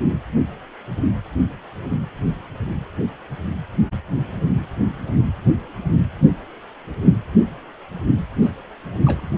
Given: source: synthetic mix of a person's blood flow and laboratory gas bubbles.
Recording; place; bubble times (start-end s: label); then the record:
Doppler ultrasound of blood flow; precordium
8.41-8.51 s: bubbles
9.04-9.31 s: bubbles
From the record:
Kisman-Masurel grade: 221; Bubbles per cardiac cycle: several, 3 to 8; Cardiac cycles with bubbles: 10 to 50%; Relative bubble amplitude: barely perceptible (0.100 to 0.250); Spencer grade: 2 (many but less than half of the cardiac periods contain bubble signals, singularly or in groups); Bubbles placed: anywhere in the cardiac cycle